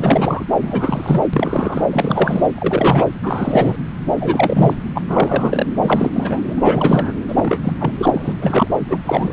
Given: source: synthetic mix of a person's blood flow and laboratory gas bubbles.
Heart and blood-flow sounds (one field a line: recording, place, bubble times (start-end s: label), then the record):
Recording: Doppler ultrasound of blood flow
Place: subclavian vein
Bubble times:
0.00-0.44 s: bubbles
0.61-1.25 s: bubbles
1.33-1.86 s: bubbles
1.90-2.48 s: bubbles
2.54-3.08 s: bubbles
3.23-3.77 s: bubbles
4.20-4.76 s: bubbles
4.96-5.02 s: bubbles
5.08-5.66 s: bubbles
5.81-6.11 s: bubbles
6.15-6.43 s: bubbles
6.47-7.12 s: bubbles
7.28-7.61 s: bubbles
7.63-7.77 s: bubbles
7.79-7.93 s: bubbles
7.99-8.11 s: bubbles
8.13-8.68 s: bubbles
8.88-9.00 s: bubbles
9.04-9.33 s: bubbles
From the record:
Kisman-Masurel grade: 343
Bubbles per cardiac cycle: rolling drumbeat, 9 or more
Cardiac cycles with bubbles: 100%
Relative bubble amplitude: loud (0.450 to 0.775)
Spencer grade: 3 (all of the cardiac periods contain showers or single bubble signals, but not dominating or overriding the cardiac motion signals)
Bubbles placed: anywhere in the cardiac cycle